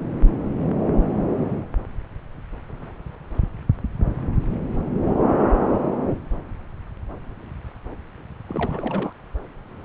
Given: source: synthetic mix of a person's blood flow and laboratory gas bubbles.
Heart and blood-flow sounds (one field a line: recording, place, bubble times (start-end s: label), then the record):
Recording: Doppler ultrasound of blood flow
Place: subclavian vein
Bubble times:
8.49-9.13 s: bubbles
From the record:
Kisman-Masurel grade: 211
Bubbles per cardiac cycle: several, 3 to 8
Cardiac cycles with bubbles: 1 to 10%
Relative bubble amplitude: barely perceptible (0.100 to 0.250)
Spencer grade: 1 (occasional bubble signal discernible with the cardiac motion signal, with majority of cardiac periods free of bubbles)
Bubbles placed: anywhere in the cardiac cycle